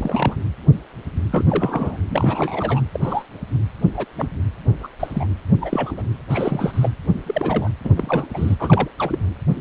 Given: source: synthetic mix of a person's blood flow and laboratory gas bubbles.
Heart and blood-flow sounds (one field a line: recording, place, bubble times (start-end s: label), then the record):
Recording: Doppler ultrasound of blood flow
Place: precordium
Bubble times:
0.00-0.35 s: bubbles
1.30-1.44 s: bubbles
1.48-1.98 s: bubbles
2.10-2.81 s: bubbles
2.94-3.23 s: bubbles
3.94-4.05 s: bubbles
4.17-4.28 s: bubbles
4.83-4.88 s: bubbles
5.00-5.27 s: bubbles
5.61-6.03 s: bubbles
6.29-6.89 s: bubbles
7.26-7.69 s: bubbles
7.84-7.90 s: bubbles
7.96-8.28 s: bubbles
8.34-8.55 s: bubbles
8.59-8.88 s: bubbles
8.99-9.19 s: bubbles
From the record:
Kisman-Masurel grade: 232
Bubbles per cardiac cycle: several, 3 to 8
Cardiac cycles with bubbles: 50 to 99%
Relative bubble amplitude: moderate (0.250 to 0.450)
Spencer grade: 3 (all of the cardiac periods contain showers or single bubble signals, but not dominating or overriding the cardiac motion signals)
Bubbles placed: anywhere in the cardiac cycle